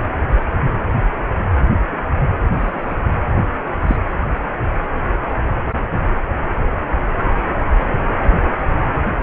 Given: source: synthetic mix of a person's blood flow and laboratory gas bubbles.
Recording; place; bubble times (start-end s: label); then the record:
Doppler ultrasound of blood flow; precordium
2.58-2.95 s: bubbles
3.86-3.97 s: bubbles
From the record:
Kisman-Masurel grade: 112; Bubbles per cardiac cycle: 1 to 2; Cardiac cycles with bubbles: 1 to 10%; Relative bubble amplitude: moderate (0.250 to 0.450); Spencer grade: 1 (occasional bubble signal discernible with the cardiac motion signal, with majority of cardiac periods free of bubbles); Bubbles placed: anywhere in the cardiac cycle